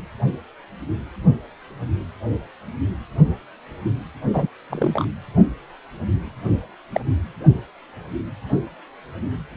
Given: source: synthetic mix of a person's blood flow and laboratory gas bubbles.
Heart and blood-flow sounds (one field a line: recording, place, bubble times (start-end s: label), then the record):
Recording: Doppler ultrasound of blood flow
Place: precordium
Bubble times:
4.33-4.47 s: bubbles
4.70-5.05 s: bubbles
6.92-7.00 s: bubbles
From the record:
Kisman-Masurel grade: 122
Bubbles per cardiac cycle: 1 to 2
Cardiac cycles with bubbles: 10 to 50%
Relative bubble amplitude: moderate (0.250 to 0.450)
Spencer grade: 2 (many but less than half of the cardiac periods contain bubble signals, singularly or in groups)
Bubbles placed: anywhere in the cardiac cycle